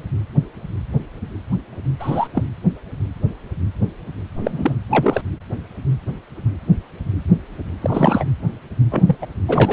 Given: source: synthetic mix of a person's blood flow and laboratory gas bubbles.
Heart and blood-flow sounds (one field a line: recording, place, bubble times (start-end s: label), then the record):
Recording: Doppler ultrasound of blood flow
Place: precordium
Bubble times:
1.99-2.28 s: bubbles
2.34-2.44 s: bubbles
4.39-4.76 s: bubbles
4.90-5.21 s: bubbles
7.81-8.24 s: bubbles
8.91-9.16 s: bubbles
9.22-9.27 s: bubbles
9.48-9.73 s: bubbles
From the record:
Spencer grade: 2 (many but less than half of the cardiac periods contain bubble signals, singularly or in groups)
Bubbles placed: anywhere in the cardiac cycle